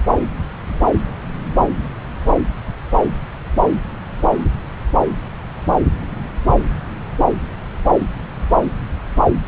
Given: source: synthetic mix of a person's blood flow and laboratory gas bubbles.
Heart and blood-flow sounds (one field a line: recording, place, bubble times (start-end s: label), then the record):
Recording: Doppler ultrasound of blood flow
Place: subclavian vein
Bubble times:
no bubbles
From the record:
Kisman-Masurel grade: 000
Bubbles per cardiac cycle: 0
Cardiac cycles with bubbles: 0%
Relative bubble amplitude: no bubbles discernible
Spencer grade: 0 (complete lack of bubble signals)